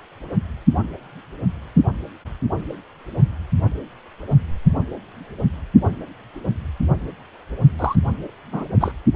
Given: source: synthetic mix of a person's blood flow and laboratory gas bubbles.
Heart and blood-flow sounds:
Doppler ultrasound of blood flow; precordium
7.79-7.96 s: bubbles
8.52-8.65 s: bubbles
8.80-8.92 s: bubbles
From the record:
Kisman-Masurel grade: 212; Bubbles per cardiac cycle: several, 3 to 8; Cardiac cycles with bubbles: 1 to 10%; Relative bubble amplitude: moderate (0.250 to 0.450); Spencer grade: 1 (occasional bubble signal discernible with the cardiac motion signal, with majority of cardiac periods free of bubbles); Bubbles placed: only in the low amplitude regions of the cardiac cycle

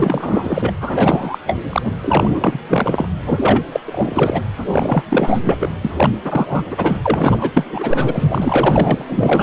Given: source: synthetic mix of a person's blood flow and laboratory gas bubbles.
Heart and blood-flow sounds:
Doppler ultrasound of blood flow; precordium
0.00-0.72 s: bubbles
0.80-1.39 s: bubbles
1.47-1.57 s: bubbles
1.70-1.93 s: bubbles
2.01-2.60 s: bubbles
2.69-3.09 s: bubbles
3.25-3.64 s: bubbles
3.72-3.80 s: bubbles
3.85-4.42 s: bubbles
4.71-5.02 s: bubbles
5.09-5.40 s: bubbles
5.44-5.56 s: bubbles
5.59-5.72 s: bubbles
5.81-6.10 s: bubbles
6.23-6.62 s: bubbles
6.71-7.00 s: bubbles
7.03-9.05 s: bubbles
9.10-9.43 s: bubbles
From the record:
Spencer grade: 4 (maximum detectable bubble signal sounding continuously throughout systole and diastole of every cardiac period, and overriding the amplitude of the normal cardiac signals); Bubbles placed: anywhere in the cardiac cycle

